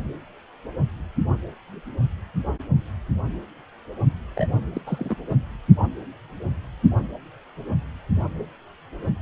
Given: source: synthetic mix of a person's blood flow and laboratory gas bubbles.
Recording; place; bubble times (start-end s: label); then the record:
Doppler ultrasound of blood flow; precordium
4.36-4.47 s: bubbles
4.74-4.81 s: bubbles
4.87-5.17 s: bubbles
5.29-5.35 s: bubbles
From the record:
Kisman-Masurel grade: 211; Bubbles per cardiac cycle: several, 3 to 8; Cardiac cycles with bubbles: 1 to 10%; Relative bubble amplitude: barely perceptible (0.100 to 0.250); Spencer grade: 1 (occasional bubble signal discernible with the cardiac motion signal, with majority of cardiac periods free of bubbles); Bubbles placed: only in the low amplitude regions of the cardiac cycle